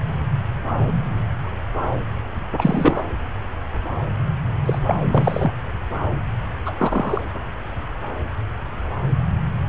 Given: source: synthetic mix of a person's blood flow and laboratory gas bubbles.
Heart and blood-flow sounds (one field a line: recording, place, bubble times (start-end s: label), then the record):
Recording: Doppler ultrasound of blood flow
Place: subclavian vein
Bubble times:
2.57-3.04 s: bubbles
4.66-4.79 s: bubbles
4.87-4.96 s: bubbles
5.12-5.52 s: bubbles
6.65-6.73 s: bubbles
6.76-7.22 s: bubbles
From the record:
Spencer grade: 2 (many but less than half of the cardiac periods contain bubble signals, singularly or in groups)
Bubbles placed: anywhere in the cardiac cycle